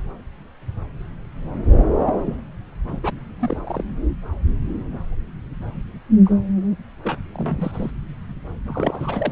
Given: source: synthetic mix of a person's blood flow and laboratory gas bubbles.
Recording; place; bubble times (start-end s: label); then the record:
Doppler ultrasound of blood flow; subclavian vein
2.01-2.41 s: bubbles
2.88-3.00 s: bubbles
3.03-3.11 s: bubbles
3.39-3.85 s: bubbles
6.25-6.29 s: bubbles
7.03-7.18 s: bubbles
7.33-7.91 s: bubbles
8.66-9.32 s: bubbles
From the record:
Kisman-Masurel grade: 221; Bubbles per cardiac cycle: several, 3 to 8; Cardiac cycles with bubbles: 10 to 50%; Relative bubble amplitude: barely perceptible (0.100 to 0.250); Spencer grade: 2 (many but less than half of the cardiac periods contain bubble signals, singularly or in groups); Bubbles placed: anywhere in the cardiac cycle